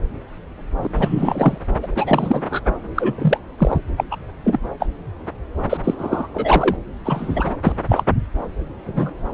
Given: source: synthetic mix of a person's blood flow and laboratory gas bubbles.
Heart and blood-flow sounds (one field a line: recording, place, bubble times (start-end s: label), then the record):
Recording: Doppler ultrasound of blood flow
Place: subclavian vein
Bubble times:
0.83-0.89 s: bubbles
0.96-1.58 s: bubbles
1.82-1.87 s: bubbles
1.95-2.42 s: bubbles
2.50-2.60 s: bubbles
2.94-3.15 s: bubbles
3.18-3.38 s: bubbles
3.58-3.78 s: bubbles
3.97-4.04 s: bubbles
4.11-4.16 s: bubbles
4.44-4.58 s: bubbles
4.79-4.86 s: bubbles
5.69-5.77 s: bubbles
5.83-5.94 s: bubbles
5.98-6.27 s: bubbles
6.34-6.76 s: bubbles
7.05-7.52 s: bubbles
7.63-7.72 s: bubbles
7.89-8.04 s: bubbles
8.86-9.13 s: bubbles
From the record:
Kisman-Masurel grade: 233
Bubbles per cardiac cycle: several, 3 to 8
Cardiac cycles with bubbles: 50 to 99%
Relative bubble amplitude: loud (0.450 to 0.775)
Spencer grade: 3 (all of the cardiac periods contain showers or single bubble signals, but not dominating or overriding the cardiac motion signals)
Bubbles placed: anywhere in the cardiac cycle